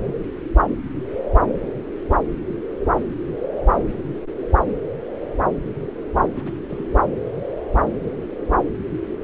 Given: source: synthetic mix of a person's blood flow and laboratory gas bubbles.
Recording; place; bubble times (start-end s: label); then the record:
Doppler ultrasound of blood flow; subclavian vein
6.34-6.52 s: bubbles
6.70-6.87 s: bubbles
From the record:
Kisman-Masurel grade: 111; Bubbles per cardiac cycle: 1 to 2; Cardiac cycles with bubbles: 1 to 10%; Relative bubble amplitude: barely perceptible (0.100 to 0.250); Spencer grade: 1 (occasional bubble signal discernible with the cardiac motion signal, with majority of cardiac periods free of bubbles); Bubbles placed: anywhere in the cardiac cycle